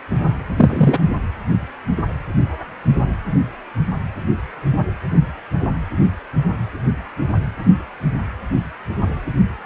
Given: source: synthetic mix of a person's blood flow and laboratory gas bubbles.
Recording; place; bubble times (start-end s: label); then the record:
Doppler ultrasound of blood flow; precordium
0.56-0.98 s: bubbles
From the record:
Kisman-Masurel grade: 123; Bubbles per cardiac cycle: 1 to 2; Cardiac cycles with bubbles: 10 to 50%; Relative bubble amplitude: loud (0.450 to 0.775); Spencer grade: 2 (many but less than half of the cardiac periods contain bubble signals, singularly or in groups); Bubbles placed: anywhere in the cardiac cycle